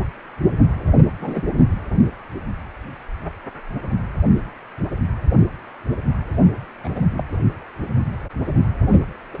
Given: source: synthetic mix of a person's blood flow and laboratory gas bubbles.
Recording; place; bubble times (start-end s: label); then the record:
Doppler ultrasound of blood flow; precordium
1.20-1.42 s: bubbles
6.84-7.01 s: bubbles
7.17-7.23 s: bubbles
9.33-9.38 s: bubbles
From the record:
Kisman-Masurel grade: 122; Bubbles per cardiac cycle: 1 to 2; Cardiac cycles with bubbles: 10 to 50%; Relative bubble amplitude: moderate (0.250 to 0.450); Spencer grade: 2 (many but less than half of the cardiac periods contain bubble signals, singularly or in groups); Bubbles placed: only in the low amplitude regions of the cardiac cycle